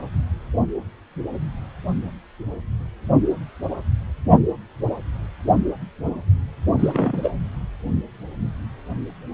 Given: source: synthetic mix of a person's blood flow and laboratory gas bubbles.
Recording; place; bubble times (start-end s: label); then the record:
Doppler ultrasound of blood flow; precordium
6.79-7.31 s: bubbles
From the record:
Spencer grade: 1 (occasional bubble signal discernible with the cardiac motion signal, with majority of cardiac periods free of bubbles); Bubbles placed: only in the low amplitude regions of the cardiac cycle